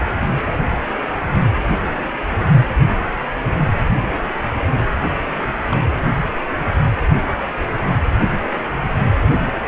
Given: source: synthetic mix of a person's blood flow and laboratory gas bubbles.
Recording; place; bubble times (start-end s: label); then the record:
Doppler ultrasound of blood flow; precordium
1.11-1.17 s: bubbles
2.30-2.50 s: bubbles
5.68-5.84 s: bubbles
From the record:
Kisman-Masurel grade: 121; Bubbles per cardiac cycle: 1 to 2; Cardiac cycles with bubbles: 10 to 50%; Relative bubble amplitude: barely perceptible (0.100 to 0.250); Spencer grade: 2 (many but less than half of the cardiac periods contain bubble signals, singularly or in groups); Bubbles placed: anywhere in the cardiac cycle